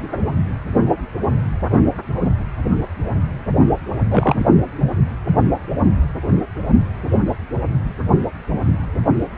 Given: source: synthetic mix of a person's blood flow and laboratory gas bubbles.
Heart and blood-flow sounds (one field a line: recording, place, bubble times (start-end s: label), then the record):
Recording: Doppler ultrasound of blood flow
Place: precordium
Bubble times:
4.08-4.46 s: bubbles
From the record:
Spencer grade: 1 (occasional bubble signal discernible with the cardiac motion signal, with majority of cardiac periods free of bubbles)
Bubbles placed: anywhere in the cardiac cycle